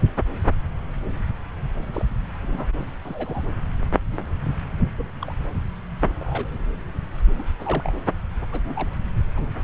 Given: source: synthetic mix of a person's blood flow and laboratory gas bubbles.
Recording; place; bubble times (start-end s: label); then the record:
Doppler ultrasound of blood flow; subclavian vein
1.78-2.05 s: bubbles
2.42-2.67 s: bubbles
3.01-3.44 s: bubbles
4.98-5.07 s: bubbles
5.22-5.33 s: bubbles
6.20-6.45 s: bubbles
7.39-7.42 s: bubbles
7.59-7.92 s: bubbles
8.51-8.62 s: bubbles
8.69-8.88 s: bubbles
9.36-9.45 s: bubbles
From the record:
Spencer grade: 2 (many but less than half of the cardiac periods contain bubble signals, singularly or in groups); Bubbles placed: anywhere in the cardiac cycle